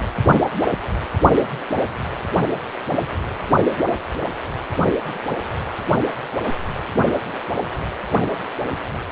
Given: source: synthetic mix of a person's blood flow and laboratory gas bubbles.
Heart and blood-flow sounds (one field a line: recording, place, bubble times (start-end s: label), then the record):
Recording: Doppler ultrasound of blood flow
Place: precordium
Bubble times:
no bubbles
From the record:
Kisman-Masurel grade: 000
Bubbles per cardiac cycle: 0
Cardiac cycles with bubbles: 0%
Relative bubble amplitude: no bubbles discernible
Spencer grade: 0 (complete lack of bubble signals)